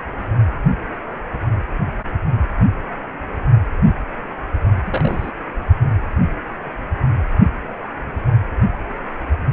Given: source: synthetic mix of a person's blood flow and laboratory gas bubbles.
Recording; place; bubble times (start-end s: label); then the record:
Doppler ultrasound of blood flow; precordium
4.86-5.31 s: bubbles
From the record:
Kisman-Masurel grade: 121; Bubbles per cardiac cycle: 1 to 2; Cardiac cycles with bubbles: 10 to 50%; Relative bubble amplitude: barely perceptible (0.100 to 0.250); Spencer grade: 2 (many but less than half of the cardiac periods contain bubble signals, singularly or in groups); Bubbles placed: anywhere in the cardiac cycle